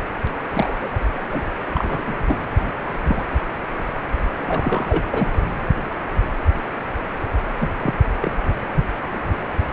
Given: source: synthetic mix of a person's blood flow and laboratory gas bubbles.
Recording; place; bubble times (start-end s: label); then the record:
Doppler ultrasound of blood flow; precordium
0.54-0.90 s: bubbles
1.32-1.42 s: bubbles
1.74-2.01 s: bubbles
2.06-2.14 s: bubbles
2.27-2.40 s: bubbles
3.07-3.24 s: bubbles
4.42-5.03 s: bubbles
5.11-5.28 s: bubbles
7.60-7.67 s: bubbles
7.82-7.95 s: bubbles
8.21-8.36 s: bubbles
From the record:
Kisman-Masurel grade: 222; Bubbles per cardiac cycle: several, 3 to 8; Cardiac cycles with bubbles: 10 to 50%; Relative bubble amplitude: moderate (0.250 to 0.450); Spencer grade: 2 (many but less than half of the cardiac periods contain bubble signals, singularly or in groups); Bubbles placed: anywhere in the cardiac cycle